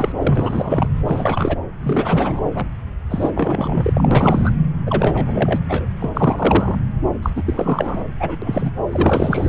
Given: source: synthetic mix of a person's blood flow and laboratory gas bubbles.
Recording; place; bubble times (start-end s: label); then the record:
Doppler ultrasound of blood flow; subclavian vein
0.00-0.12 s: bubbles
0.19-0.89 s: bubbles
1.03-1.60 s: bubbles
1.83-2.41 s: bubbles
2.54-2.67 s: bubbles
3.10-3.31 s: bubbles
3.35-4.50 s: bubbles
4.86-5.59 s: bubbles
5.69-5.86 s: bubbles
5.99-6.09 s: bubbles
6.14-6.75 s: bubbles
7.22-7.30 s: bubbles
7.35-7.43 s: bubbles
7.45-8.04 s: bubbles
8.20-8.37 s: bubbles
8.42-8.72 s: bubbles
8.91-9.49 s: bubbles
From the record:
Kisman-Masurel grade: 343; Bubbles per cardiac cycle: rolling drumbeat, 9 or more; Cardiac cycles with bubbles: 100%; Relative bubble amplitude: loud (0.450 to 0.775); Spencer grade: 3 (all of the cardiac periods contain showers or single bubble signals, but not dominating or overriding the cardiac motion signals); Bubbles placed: anywhere in the cardiac cycle